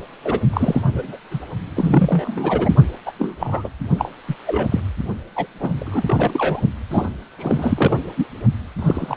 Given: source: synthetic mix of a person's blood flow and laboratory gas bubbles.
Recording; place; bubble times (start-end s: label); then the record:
Doppler ultrasound of blood flow; precordium
0.24-0.41 s: bubbles
0.53-0.81 s: bubbles
0.87-1.17 s: bubbles
1.30-1.40 s: bubbles
1.76-2.75 s: bubbles
3.05-3.12 s: bubbles
3.19-3.69 s: bubbles
3.99-4.10 s: bubbles
4.28-4.36 s: bubbles
4.46-4.68 s: bubbles
4.71-4.80 s: bubbles
5.36-5.46 s: bubbles
5.55-6.61 s: bubbles
6.90-7.07 s: bubbles
7.39-8.00 s: bubbles
8.16-8.27 s: bubbles
8.79-9.17 s: bubbles
From the record:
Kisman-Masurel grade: 242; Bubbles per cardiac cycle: several, 3 to 8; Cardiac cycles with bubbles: 100%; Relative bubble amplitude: moderate (0.250 to 0.450); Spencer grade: 3 (all of the cardiac periods contain showers or single bubble signals, but not dominating or overriding the cardiac motion signals); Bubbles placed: only in the low amplitude regions of the cardiac cycle